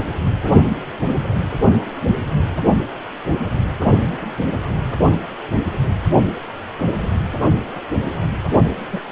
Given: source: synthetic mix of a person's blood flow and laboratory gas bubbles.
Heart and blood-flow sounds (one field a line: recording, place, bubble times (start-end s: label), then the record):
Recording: Doppler ultrasound of blood flow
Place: precordium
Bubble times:
8.92-9.04 s: bubbles
From the record:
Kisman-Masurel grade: 211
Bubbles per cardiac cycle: several, 3 to 8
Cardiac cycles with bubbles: 1 to 10%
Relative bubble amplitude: barely perceptible (0.100 to 0.250)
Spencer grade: 1 (occasional bubble signal discernible with the cardiac motion signal, with majority of cardiac periods free of bubbles)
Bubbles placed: only in the low amplitude regions of the cardiac cycle